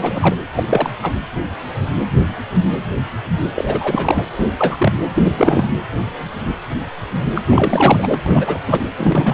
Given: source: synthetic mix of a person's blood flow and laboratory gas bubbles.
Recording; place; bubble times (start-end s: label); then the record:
Doppler ultrasound of blood flow; precordium
0.00-0.36 s: bubbles
0.55-0.64 s: bubbles
0.69-0.90 s: bubbles
1.02-1.12 s: bubbles
3.54-4.26 s: bubbles
4.58-4.77 s: bubbles
4.79-4.92 s: bubbles
5.13-5.32 s: bubbles
5.37-5.67 s: bubbles
7.33-7.42 s: bubbles
7.49-8.18 s: bubbles
8.26-8.60 s: bubbles
8.66-8.80 s: bubbles
8.96-9.33 s: bubbles
From the record:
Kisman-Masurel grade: 333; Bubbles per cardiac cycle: rolling drumbeat, 9 or more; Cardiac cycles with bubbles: 50 to 99%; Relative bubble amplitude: loud (0.450 to 0.775); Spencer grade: 3 (all of the cardiac periods contain showers or single bubble signals, but not dominating or overriding the cardiac motion signals); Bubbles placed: anywhere in the cardiac cycle